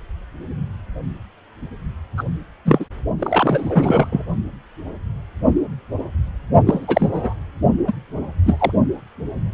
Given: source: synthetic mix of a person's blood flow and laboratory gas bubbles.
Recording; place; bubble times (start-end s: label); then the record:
Doppler ultrasound of blood flow; precordium
2.17-2.23 s: bubbles
2.65-2.85 s: bubbles
3.19-4.08 s: bubbles
4.12-4.25 s: bubbles
6.66-7.33 s: bubbles
7.87-7.94 s: bubbles
8.45-8.71 s: bubbles
From the record:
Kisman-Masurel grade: 233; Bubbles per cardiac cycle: several, 3 to 8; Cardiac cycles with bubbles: 50 to 99%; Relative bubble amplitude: loud (0.450 to 0.775); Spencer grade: 3 (all of the cardiac periods contain showers or single bubble signals, but not dominating or overriding the cardiac motion signals); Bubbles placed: only in the low amplitude regions of the cardiac cycle